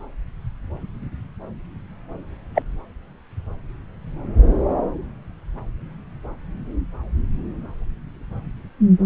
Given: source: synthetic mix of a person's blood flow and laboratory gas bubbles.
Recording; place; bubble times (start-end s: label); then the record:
Doppler ultrasound of blood flow; subclavian vein
2.54-2.62 s: bubbles
From the record:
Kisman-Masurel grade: 113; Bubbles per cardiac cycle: 1 to 2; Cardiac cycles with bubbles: 1 to 10%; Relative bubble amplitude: loud (0.450 to 0.775); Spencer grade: 1 (occasional bubble signal discernible with the cardiac motion signal, with majority of cardiac periods free of bubbles); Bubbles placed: anywhere in the cardiac cycle